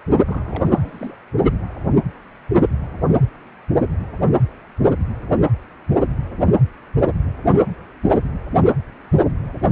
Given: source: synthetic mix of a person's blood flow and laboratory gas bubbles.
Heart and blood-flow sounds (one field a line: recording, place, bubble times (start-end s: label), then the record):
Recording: Doppler ultrasound of blood flow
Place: precordium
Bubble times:
0.26-0.64 s: bubbles
0.66-1.15 s: bubbles
From the record:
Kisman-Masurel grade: 211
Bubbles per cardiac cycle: several, 3 to 8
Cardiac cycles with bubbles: 1 to 10%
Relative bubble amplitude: barely perceptible (0.100 to 0.250)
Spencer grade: 1 (occasional bubble signal discernible with the cardiac motion signal, with majority of cardiac periods free of bubbles)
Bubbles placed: only in the low amplitude regions of the cardiac cycle